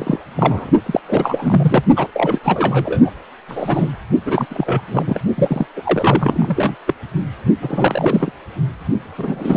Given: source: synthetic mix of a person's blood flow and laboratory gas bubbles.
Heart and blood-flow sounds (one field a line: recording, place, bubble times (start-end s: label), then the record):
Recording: Doppler ultrasound of blood flow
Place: precordium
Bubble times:
0.00-0.19 s: bubbles
0.37-0.70 s: bubbles
0.85-1.00 s: bubbles
1.08-1.83 s: bubbles
1.96-2.07 s: bubbles
2.12-2.40 s: bubbles
2.43-3.10 s: bubbles
3.48-3.89 s: bubbles
4.25-4.46 s: bubbles
4.50-4.82 s: bubbles
4.87-5.21 s: bubbles
5.37-5.66 s: bubbles
5.76-6.76 s: bubbles
6.87-6.94 s: bubbles
7.62-8.32 s: bubbles
9.17-9.57 s: bubbles
From the record:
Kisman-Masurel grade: 343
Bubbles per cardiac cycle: rolling drumbeat, 9 or more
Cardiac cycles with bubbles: 100%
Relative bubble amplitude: loud (0.450 to 0.775)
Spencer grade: 3 (all of the cardiac periods contain showers or single bubble signals, but not dominating or overriding the cardiac motion signals)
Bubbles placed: only in the low amplitude regions of the cardiac cycle